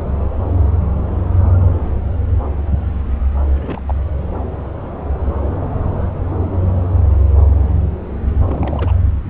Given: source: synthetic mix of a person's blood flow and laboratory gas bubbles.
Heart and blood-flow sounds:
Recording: Doppler ultrasound of blood flow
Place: subclavian vein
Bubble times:
3.52-3.84 s: bubbles
3.87-3.95 s: bubbles
8.45-8.92 s: bubbles
From the record:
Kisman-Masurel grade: 211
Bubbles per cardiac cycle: several, 3 to 8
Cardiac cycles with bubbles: 1 to 10%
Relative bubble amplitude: barely perceptible (0.100 to 0.250)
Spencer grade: 1 (occasional bubble signal discernible with the cardiac motion signal, with majority of cardiac periods free of bubbles)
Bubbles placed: anywhere in the cardiac cycle

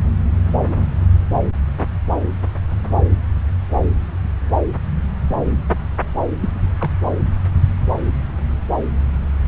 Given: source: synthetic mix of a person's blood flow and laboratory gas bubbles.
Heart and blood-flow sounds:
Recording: Doppler ultrasound of blood flow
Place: subclavian vein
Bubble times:
6.41-6.50 s: bubbles
6.80-6.90 s: bubbles
From the record:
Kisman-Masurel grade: 212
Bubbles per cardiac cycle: several, 3 to 8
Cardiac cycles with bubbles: 1 to 10%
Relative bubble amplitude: moderate (0.250 to 0.450)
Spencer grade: 1 (occasional bubble signal discernible with the cardiac motion signal, with majority of cardiac periods free of bubbles)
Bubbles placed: anywhere in the cardiac cycle

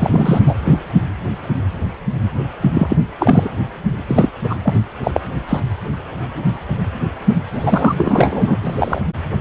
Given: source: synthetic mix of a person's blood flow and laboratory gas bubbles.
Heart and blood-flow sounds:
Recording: Doppler ultrasound of blood flow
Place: precordium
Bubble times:
0.00-0.45 s: bubbles
0.47-0.55 s: bubbles
0.64-0.79 s: bubbles
2.62-2.97 s: bubbles
3.20-3.49 s: bubbles
4.07-4.29 s: bubbles
4.43-4.58 s: bubbles
4.63-4.73 s: bubbles
5.03-5.11 s: bubbles
5.14-5.20 s: bubbles
5.48-5.61 s: bubbles
7.52-8.56 s: bubbles
8.61-9.01 s: bubbles
From the record:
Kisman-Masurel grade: 333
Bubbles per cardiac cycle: rolling drumbeat, 9 or more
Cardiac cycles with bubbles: 50 to 99%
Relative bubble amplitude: loud (0.450 to 0.775)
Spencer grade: 3 (all of the cardiac periods contain showers or single bubble signals, but not dominating or overriding the cardiac motion signals)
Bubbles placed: anywhere in the cardiac cycle

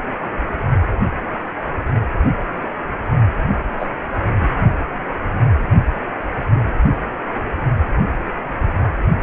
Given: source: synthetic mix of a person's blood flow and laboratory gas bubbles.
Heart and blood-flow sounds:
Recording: Doppler ultrasound of blood flow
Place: precordium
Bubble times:
3.79-3.87 s: bubbles
4.41-4.50 s: bubbles
From the record:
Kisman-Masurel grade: 111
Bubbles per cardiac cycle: 1 to 2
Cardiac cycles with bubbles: 1 to 10%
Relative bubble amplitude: barely perceptible (0.100 to 0.250)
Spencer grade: 1 (occasional bubble signal discernible with the cardiac motion signal, with majority of cardiac periods free of bubbles)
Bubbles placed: only in the low amplitude regions of the cardiac cycle

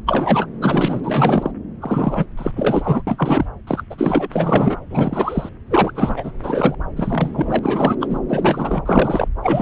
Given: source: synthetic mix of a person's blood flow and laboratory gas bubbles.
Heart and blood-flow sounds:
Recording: Doppler ultrasound of blood flow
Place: subclavian vein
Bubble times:
0.07-0.46 s: bubbles
0.61-1.00 s: bubbles
1.03-1.51 s: bubbles
1.80-2.26 s: bubbles
2.37-2.52 s: bubbles
2.56-3.03 s: bubbles
3.07-3.46 s: bubbles
3.67-3.82 s: bubbles
3.90-4.29 s: bubbles
4.32-4.76 s: bubbles
4.90-5.50 s: bubbles
5.70-6.31 s: bubbles
6.39-6.75 s: bubbles
6.96-7.59 s: bubbles
7.62-7.96 s: bubbles
8.00-8.19 s: bubbles
8.29-8.82 s: bubbles
8.85-9.28 s: bubbles
9.42-9.62 s: bubbles
From the record:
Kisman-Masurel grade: 342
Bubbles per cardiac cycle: rolling drumbeat, 9 or more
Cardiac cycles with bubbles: 100%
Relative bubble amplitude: moderate (0.250 to 0.450)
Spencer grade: 3 (all of the cardiac periods contain showers or single bubble signals, but not dominating or overriding the cardiac motion signals)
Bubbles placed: anywhere in the cardiac cycle

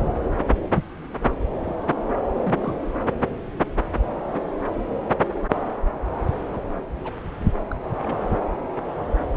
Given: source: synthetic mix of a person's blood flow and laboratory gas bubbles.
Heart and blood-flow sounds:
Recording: Doppler ultrasound of blood flow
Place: subclavian vein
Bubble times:
0.74-0.83 s: bubbles
1.60-1.74 s: bubbles
2.39-2.73 s: bubbles
6.54-6.57 s: bubbles
7.04-7.16 s: bubbles
7.71-7.77 s: bubbles
8.02-8.16 s: bubbles
From the record:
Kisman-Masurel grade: 121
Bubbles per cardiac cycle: 1 to 2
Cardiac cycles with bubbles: 10 to 50%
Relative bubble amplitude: barely perceptible (0.100 to 0.250)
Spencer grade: 2 (many but less than half of the cardiac periods contain bubble signals, singularly or in groups)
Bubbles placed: anywhere in the cardiac cycle

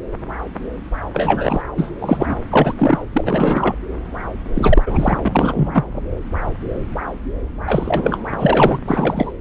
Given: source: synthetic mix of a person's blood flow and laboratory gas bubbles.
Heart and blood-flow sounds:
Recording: Doppler ultrasound of blood flow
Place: subclavian vein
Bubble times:
1.14-1.63 s: bubbles
1.76-1.91 s: bubbles
2.02-2.38 s: bubbles
2.49-2.74 s: bubbles
2.77-3.02 s: bubbles
3.12-3.75 s: bubbles
4.55-4.83 s: bubbles
4.86-5.18 s: bubbles
5.24-5.84 s: bubbles
7.65-8.19 s: bubbles
8.38-8.79 s: bubbles
8.87-9.32 s: bubbles
From the record:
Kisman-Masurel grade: 333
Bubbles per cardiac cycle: rolling drumbeat, 9 or more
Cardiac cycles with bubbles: 50 to 99%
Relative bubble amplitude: loud (0.450 to 0.775)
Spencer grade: 3 (all of the cardiac periods contain showers or single bubble signals, but not dominating or overriding the cardiac motion signals)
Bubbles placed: anywhere in the cardiac cycle

